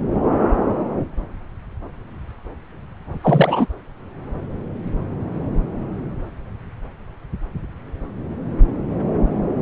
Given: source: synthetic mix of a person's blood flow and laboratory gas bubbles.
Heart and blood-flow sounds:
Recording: Doppler ultrasound of blood flow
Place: subclavian vein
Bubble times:
3.21-3.67 s: bubbles
From the record:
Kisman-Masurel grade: 213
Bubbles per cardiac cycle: several, 3 to 8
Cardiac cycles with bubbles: 1 to 10%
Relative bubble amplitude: loud (0.450 to 0.775)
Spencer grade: 1 (occasional bubble signal discernible with the cardiac motion signal, with majority of cardiac periods free of bubbles)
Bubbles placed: anywhere in the cardiac cycle

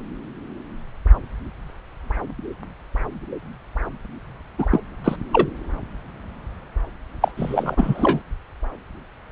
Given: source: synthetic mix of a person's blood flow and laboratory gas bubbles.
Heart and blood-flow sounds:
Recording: Doppler ultrasound of blood flow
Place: subclavian vein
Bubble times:
4.58-4.66 s: bubbles
4.71-4.80 s: bubbles
5.04-5.16 s: bubbles
5.33-5.47 s: bubbles
7.21-7.32 s: bubbles
7.37-8.21 s: bubbles
From the record:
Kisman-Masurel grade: 223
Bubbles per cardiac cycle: several, 3 to 8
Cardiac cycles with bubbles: 10 to 50%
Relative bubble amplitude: loud (0.450 to 0.775)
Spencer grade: 2 (many but less than half of the cardiac periods contain bubble signals, singularly or in groups)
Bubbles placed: anywhere in the cardiac cycle

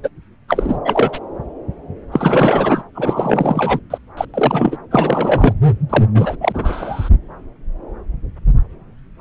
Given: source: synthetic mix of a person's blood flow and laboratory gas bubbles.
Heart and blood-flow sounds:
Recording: Doppler ultrasound of blood flow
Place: subclavian vein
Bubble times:
0.03-0.08 s: bubbles
0.48-0.78 s: bubbles
0.84-1.19 s: bubbles
2.12-2.83 s: bubbles
2.94-3.80 s: bubbles
3.90-3.98 s: bubbles
4.17-4.25 s: bubbles
4.34-4.77 s: bubbles
4.91-5.54 s: bubbles
5.89-6.05 s: bubbles
6.14-6.36 s: bubbles
6.40-7.09 s: bubbles
From the record:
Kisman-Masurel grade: 333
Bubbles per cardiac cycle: rolling drumbeat, 9 or more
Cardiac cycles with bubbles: 50 to 99%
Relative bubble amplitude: loud (0.450 to 0.775)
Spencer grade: 3 (all of the cardiac periods contain showers or single bubble signals, but not dominating or overriding the cardiac motion signals)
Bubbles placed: anywhere in the cardiac cycle

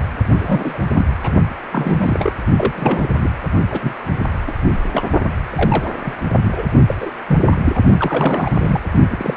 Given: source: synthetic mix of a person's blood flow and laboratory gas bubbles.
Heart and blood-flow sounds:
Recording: Doppler ultrasound of blood flow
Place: precordium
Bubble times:
0.40-0.78 s: bubbles
0.95-1.06 s: bubbles
1.23-1.32 s: bubbles
1.72-2.32 s: bubbles
2.57-3.08 s: bubbles
3.17-3.30 s: bubbles
3.71-3.95 s: bubbles
4.47-4.52 s: bubbles
4.92-5.02 s: bubbles
5.50-5.89 s: bubbles
6.04-6.13 s: bubbles
6.31-6.39 s: bubbles
6.43-6.63 s: bubbles
6.87-6.95 s: bubbles
7.00-7.10 s: bubbles
7.28-7.40 s: bubbles
7.46-7.55 s: bubbles
7.64-7.79 s: bubbles
7.97-8.80 s: bubbles
9.11-9.37 s: bubbles
From the record:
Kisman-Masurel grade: 242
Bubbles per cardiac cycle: several, 3 to 8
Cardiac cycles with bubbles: 100%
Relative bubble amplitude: moderate (0.250 to 0.450)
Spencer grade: 3 (all of the cardiac periods contain showers or single bubble signals, but not dominating or overriding the cardiac motion signals)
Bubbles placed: only in the low amplitude regions of the cardiac cycle

